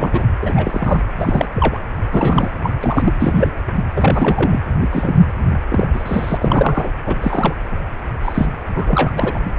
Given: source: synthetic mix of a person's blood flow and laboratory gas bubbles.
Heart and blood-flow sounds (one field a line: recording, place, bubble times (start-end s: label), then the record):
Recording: Doppler ultrasound of blood flow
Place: precordium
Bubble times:
0.00-0.24 s: bubbles
0.41-0.53 s: bubbles
0.55-1.04 s: bubbles
1.19-1.48 s: bubbles
1.56-1.80 s: bubbles
2.12-2.50 s: bubbles
2.63-2.73 s: bubbles
2.80-3.13 s: bubbles
3.19-3.52 s: bubbles
3.96-4.59 s: bubbles
4.80-4.88 s: bubbles
4.92-5.21 s: bubbles
5.69-5.87 s: bubbles
5.94-6.91 s: bubbles
7.07-7.16 s: bubbles
7.21-7.54 s: bubbles
8.22-8.47 s: bubbles
8.74-9.12 s: bubbles
9.18-9.39 s: bubbles
From the record:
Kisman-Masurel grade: 242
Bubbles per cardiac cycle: several, 3 to 8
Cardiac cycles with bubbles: 100%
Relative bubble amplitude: moderate (0.250 to 0.450)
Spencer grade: 3 (all of the cardiac periods contain showers or single bubble signals, but not dominating or overriding the cardiac motion signals)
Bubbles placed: anywhere in the cardiac cycle